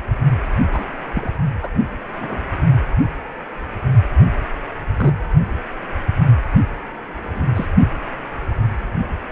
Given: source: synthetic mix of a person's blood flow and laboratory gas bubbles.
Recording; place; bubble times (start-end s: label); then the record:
Doppler ultrasound of blood flow; precordium
0.73-0.84 s: bubbles
1.14-1.30 s: bubbles
1.62-1.69 s: bubbles
2.21-2.46 s: bubbles
4.97-5.15 s: bubbles
7.23-7.68 s: bubbles
From the record:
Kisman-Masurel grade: 122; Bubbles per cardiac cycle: 1 to 2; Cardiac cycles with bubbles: 10 to 50%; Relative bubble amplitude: moderate (0.250 to 0.450); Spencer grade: 2 (many but less than half of the cardiac periods contain bubble signals, singularly or in groups); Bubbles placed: only in the low amplitude regions of the cardiac cycle